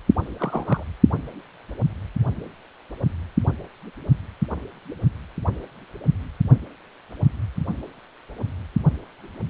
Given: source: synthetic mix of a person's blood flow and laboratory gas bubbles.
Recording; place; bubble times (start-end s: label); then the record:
Doppler ultrasound of blood flow; precordium
0.38-0.83 s: bubbles
From the record:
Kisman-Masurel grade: 112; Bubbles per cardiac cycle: 1 to 2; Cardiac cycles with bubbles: 1 to 10%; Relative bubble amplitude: moderate (0.250 to 0.450); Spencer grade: 1 (occasional bubble signal discernible with the cardiac motion signal, with majority of cardiac periods free of bubbles); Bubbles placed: only in the low amplitude regions of the cardiac cycle